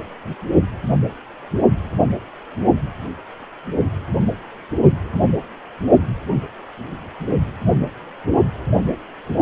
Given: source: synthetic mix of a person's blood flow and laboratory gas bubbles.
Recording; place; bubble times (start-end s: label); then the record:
Doppler ultrasound of blood flow; precordium
no bubbles
From the record:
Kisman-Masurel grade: 000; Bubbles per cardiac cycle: 0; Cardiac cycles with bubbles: 0%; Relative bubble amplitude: no bubbles discernible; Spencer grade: 0 (complete lack of bubble signals)